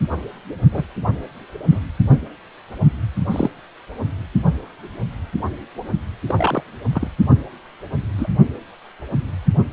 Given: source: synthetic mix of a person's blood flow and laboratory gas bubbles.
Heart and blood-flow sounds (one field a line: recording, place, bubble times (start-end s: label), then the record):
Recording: Doppler ultrasound of blood flow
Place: precordium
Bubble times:
0.72-0.85 s: bubbles
1.71-1.80 s: bubbles
3.30-3.50 s: bubbles
6.26-6.63 s: bubbles
6.93-7.07 s: bubbles
8.18-8.27 s: bubbles
From the record:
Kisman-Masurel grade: 122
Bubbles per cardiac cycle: 1 to 2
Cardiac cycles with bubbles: 10 to 50%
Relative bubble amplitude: moderate (0.250 to 0.450)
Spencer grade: 2 (many but less than half of the cardiac periods contain bubble signals, singularly or in groups)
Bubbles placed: only in the low amplitude regions of the cardiac cycle